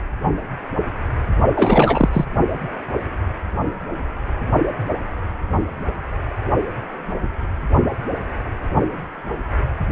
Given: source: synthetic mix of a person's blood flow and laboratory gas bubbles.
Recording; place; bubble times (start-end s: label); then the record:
Doppler ultrasound of blood flow; precordium
1.55-2.09 s: bubbles
2.12-2.27 s: bubbles
From the record:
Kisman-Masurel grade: 213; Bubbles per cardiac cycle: several, 3 to 8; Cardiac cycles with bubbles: 1 to 10%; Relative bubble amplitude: loud (0.450 to 0.775); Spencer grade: 1 (occasional bubble signal discernible with the cardiac motion signal, with majority of cardiac periods free of bubbles); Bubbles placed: only in the low amplitude regions of the cardiac cycle